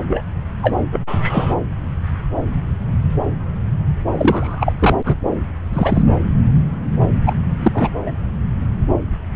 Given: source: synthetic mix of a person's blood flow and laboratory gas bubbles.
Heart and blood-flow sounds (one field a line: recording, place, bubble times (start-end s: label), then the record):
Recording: Doppler ultrasound of blood flow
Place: subclavian vein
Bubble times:
0.08-0.23 s: bubbles
0.62-0.77 s: bubbles
0.93-1.00 s: bubbles
1.07-1.55 s: bubbles
4.15-4.73 s: bubbles
4.79-4.95 s: bubbles
5.05-5.15 s: bubbles
5.73-6.03 s: bubbles
7.25-7.35 s: bubbles
7.62-7.89 s: bubbles
8.05-8.12 s: bubbles
From the record:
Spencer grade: 3 (all of the cardiac periods contain showers or single bubble signals, but not dominating or overriding the cardiac motion signals)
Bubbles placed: anywhere in the cardiac cycle